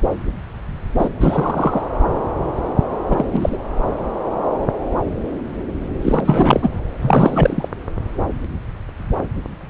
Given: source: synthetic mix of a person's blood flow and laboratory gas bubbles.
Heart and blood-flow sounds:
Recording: Doppler ultrasound of blood flow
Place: subclavian vein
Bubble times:
0.99-1.08 s: bubbles
1.20-1.83 s: bubbles
3.09-3.25 s: bubbles
3.32-3.57 s: bubbles
6.01-6.69 s: bubbles
7.01-7.68 s: bubbles
From the record:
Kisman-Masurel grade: 223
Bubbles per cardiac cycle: several, 3 to 8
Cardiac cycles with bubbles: 10 to 50%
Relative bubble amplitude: loud (0.450 to 0.775)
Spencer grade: 2 (many but less than half of the cardiac periods contain bubble signals, singularly or in groups)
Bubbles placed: anywhere in the cardiac cycle

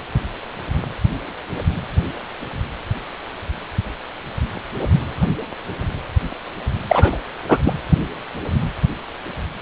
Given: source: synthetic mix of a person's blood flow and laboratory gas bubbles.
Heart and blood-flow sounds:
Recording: Doppler ultrasound of blood flow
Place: precordium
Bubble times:
6.89-7.18 s: bubbles
7.48-7.58 s: bubbles
7.65-7.74 s: bubbles
From the record:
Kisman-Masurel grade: 213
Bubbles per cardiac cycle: several, 3 to 8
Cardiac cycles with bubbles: 1 to 10%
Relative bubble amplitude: loud (0.450 to 0.775)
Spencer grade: 1 (occasional bubble signal discernible with the cardiac motion signal, with majority of cardiac periods free of bubbles)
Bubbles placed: anywhere in the cardiac cycle

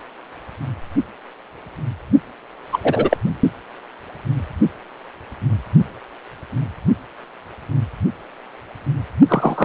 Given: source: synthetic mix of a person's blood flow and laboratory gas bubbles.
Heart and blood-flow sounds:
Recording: Doppler ultrasound of blood flow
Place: precordium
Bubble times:
2.72-2.79 s: bubbles
2.83-3.17 s: bubbles
9.28-9.65 s: bubbles
From the record:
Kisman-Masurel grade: 223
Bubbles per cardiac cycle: several, 3 to 8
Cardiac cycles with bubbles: 10 to 50%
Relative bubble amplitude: loud (0.450 to 0.775)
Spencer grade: 2 (many but less than half of the cardiac periods contain bubble signals, singularly or in groups)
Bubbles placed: only in the low amplitude regions of the cardiac cycle

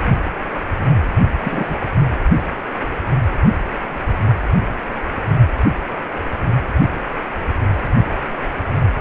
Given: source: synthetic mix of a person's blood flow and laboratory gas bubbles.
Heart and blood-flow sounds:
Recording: Doppler ultrasound of blood flow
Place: precordium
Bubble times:
1.44-1.79 s: bubbles
From the record:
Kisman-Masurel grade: 122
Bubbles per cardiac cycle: 1 to 2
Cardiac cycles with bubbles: 10 to 50%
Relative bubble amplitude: moderate (0.250 to 0.450)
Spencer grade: 2 (many but less than half of the cardiac periods contain bubble signals, singularly or in groups)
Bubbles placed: anywhere in the cardiac cycle

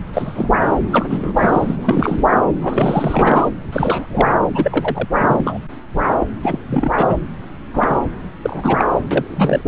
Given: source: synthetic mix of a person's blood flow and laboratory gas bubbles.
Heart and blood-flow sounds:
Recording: Doppler ultrasound of blood flow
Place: subclavian vein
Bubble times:
0.13-0.50 s: bubbles
0.61-0.68 s: bubbles
0.89-1.32 s: bubbles
1.36-1.75 s: bubbles
1.82-2.23 s: bubbles
2.31-2.38 s: bubbles
2.61-3.48 s: bubbles
3.72-4.28 s: bubbles
4.54-5.07 s: bubbles
5.15-5.60 s: bubbles
6.19-6.27 s: bubbles
6.43-6.59 s: bubbles
6.68-7.15 s: bubbles
7.74-7.99 s: bubbles
8.42-8.85 s: bubbles
9.11-9.62 s: bubbles
From the record:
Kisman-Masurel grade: 342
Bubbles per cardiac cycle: rolling drumbeat, 9 or more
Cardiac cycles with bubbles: 100%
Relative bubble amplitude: moderate (0.250 to 0.450)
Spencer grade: 3 (all of the cardiac periods contain showers or single bubble signals, but not dominating or overriding the cardiac motion signals)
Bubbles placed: anywhere in the cardiac cycle

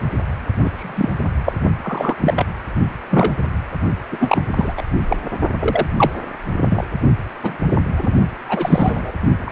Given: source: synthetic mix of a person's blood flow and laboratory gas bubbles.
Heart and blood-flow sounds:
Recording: Doppler ultrasound of blood flow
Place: precordium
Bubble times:
0.64-0.70 s: bubbles
0.75-1.12 s: bubbles
1.45-1.52 s: bubbles
1.82-2.17 s: bubbles
2.20-2.46 s: bubbles
3.10-3.32 s: bubbles
4.12-4.42 s: bubbles
4.56-4.73 s: bubbles
4.77-4.83 s: bubbles
5.08-5.17 s: bubbles
5.60-5.86 s: bubbles
5.97-6.11 s: bubbles
6.60-6.83 s: bubbles
7.43-7.58 s: bubbles
7.71-7.78 s: bubbles
7.98-8.12 s: bubbles
8.48-9.11 s: bubbles
9.40-9.52 s: bubbles
From the record:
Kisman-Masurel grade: 233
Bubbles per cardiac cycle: several, 3 to 8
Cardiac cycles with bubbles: 50 to 99%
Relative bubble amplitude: loud (0.450 to 0.775)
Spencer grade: 3 (all of the cardiac periods contain showers or single bubble signals, but not dominating or overriding the cardiac motion signals)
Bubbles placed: only in the low amplitude regions of the cardiac cycle

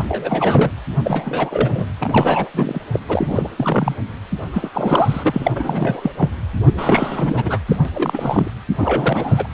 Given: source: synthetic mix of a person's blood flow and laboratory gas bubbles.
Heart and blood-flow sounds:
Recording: Doppler ultrasound of blood flow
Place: precordium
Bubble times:
0.00-0.71 s: bubbles
1.03-1.86 s: bubbles
1.99-2.49 s: bubbles
2.53-2.79 s: bubbles
2.92-3.00 s: bubbles
3.08-3.49 s: bubbles
3.57-3.94 s: bubbles
4.53-4.70 s: bubbles
4.74-5.52 s: bubbles
5.55-6.12 s: bubbles
6.17-6.30 s: bubbles
6.64-7.58 s: bubbles
7.68-7.77 s: bubbles
7.85-8.51 s: bubbles
8.77-9.47 s: bubbles
From the record:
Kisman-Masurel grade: 343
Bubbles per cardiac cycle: rolling drumbeat, 9 or more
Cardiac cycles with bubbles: 100%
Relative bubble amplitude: loud (0.450 to 0.775)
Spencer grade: 3 (all of the cardiac periods contain showers or single bubble signals, but not dominating or overriding the cardiac motion signals)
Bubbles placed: anywhere in the cardiac cycle

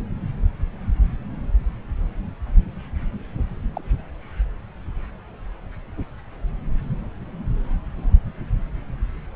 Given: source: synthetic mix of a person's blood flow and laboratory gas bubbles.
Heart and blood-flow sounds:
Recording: Doppler ultrasound of blood flow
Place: subclavian vein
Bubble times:
3.38-3.44 s: bubbles
3.73-3.81 s: bubbles
From the record:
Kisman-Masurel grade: 111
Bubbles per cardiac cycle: 1 to 2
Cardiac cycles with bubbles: 1 to 10%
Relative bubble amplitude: barely perceptible (0.100 to 0.250)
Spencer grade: 1 (occasional bubble signal discernible with the cardiac motion signal, with majority of cardiac periods free of bubbles)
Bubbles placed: anywhere in the cardiac cycle

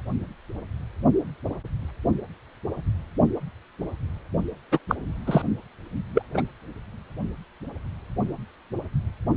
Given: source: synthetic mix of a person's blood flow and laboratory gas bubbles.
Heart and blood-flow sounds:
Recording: Doppler ultrasound of blood flow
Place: precordium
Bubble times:
4.72-4.79 s: bubbles
4.88-4.95 s: bubbles
5.26-5.42 s: bubbles
6.14-6.22 s: bubbles
6.33-6.43 s: bubbles
From the record:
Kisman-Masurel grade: 223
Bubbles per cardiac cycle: several, 3 to 8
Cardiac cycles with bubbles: 10 to 50%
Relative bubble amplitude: loud (0.450 to 0.775)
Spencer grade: 2 (many but less than half of the cardiac periods contain bubble signals, singularly or in groups)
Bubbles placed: anywhere in the cardiac cycle

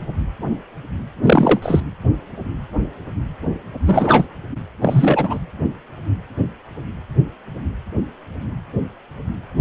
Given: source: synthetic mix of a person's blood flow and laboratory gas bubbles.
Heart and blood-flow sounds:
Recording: Doppler ultrasound of blood flow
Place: precordium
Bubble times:
1.24-1.60 s: bubbles
1.62-1.83 s: bubbles
3.85-4.25 s: bubbles
4.81-5.39 s: bubbles
From the record:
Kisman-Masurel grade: 223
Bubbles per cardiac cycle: several, 3 to 8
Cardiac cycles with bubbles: 10 to 50%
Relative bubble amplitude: loud (0.450 to 0.775)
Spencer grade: 2 (many but less than half of the cardiac periods contain bubble signals, singularly or in groups)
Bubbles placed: anywhere in the cardiac cycle

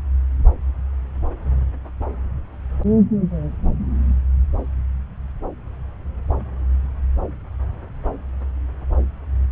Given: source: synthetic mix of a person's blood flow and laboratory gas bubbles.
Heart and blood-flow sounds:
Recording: Doppler ultrasound of blood flow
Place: subclavian vein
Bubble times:
no bubbles
From the record:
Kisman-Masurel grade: 000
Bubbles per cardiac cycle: 0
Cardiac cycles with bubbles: 0%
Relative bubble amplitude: no bubbles discernible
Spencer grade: 0 (complete lack of bubble signals)

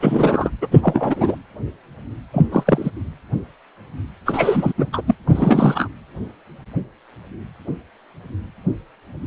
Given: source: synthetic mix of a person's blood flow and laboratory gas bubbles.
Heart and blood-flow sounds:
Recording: Doppler ultrasound of blood flow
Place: precordium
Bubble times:
0.00-0.50 s: bubbles
0.61-0.68 s: bubbles
0.71-1.35 s: bubbles
2.33-2.49 s: bubbles
2.51-2.91 s: bubbles
4.25-4.73 s: bubbles
4.77-4.87 s: bubbles
4.92-5.01 s: bubbles
5.06-5.14 s: bubbles
5.27-5.88 s: bubbles
From the record:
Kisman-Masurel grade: 233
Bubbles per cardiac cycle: several, 3 to 8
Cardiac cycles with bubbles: 50 to 99%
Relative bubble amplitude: loud (0.450 to 0.775)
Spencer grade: 3 (all of the cardiac periods contain showers or single bubble signals, but not dominating or overriding the cardiac motion signals)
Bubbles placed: anywhere in the cardiac cycle

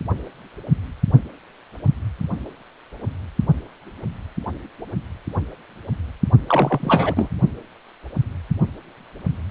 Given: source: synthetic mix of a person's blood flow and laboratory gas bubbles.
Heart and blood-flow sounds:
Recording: Doppler ultrasound of blood flow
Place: precordium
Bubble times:
6.47-7.29 s: bubbles
From the record:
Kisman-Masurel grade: 213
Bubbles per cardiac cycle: several, 3 to 8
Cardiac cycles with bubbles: 1 to 10%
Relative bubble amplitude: loud (0.450 to 0.775)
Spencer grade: 1 (occasional bubble signal discernible with the cardiac motion signal, with majority of cardiac periods free of bubbles)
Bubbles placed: only in the low amplitude regions of the cardiac cycle

